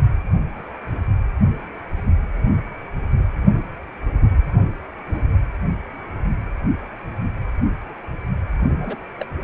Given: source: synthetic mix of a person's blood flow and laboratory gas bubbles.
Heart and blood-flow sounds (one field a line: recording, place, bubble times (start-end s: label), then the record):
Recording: Doppler ultrasound of blood flow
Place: precordium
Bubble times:
8.65-8.96 s: bubbles
9.18-9.26 s: bubbles
From the record:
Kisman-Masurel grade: 211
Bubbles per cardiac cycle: several, 3 to 8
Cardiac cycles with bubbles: 1 to 10%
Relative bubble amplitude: barely perceptible (0.100 to 0.250)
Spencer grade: 1 (occasional bubble signal discernible with the cardiac motion signal, with majority of cardiac periods free of bubbles)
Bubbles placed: anywhere in the cardiac cycle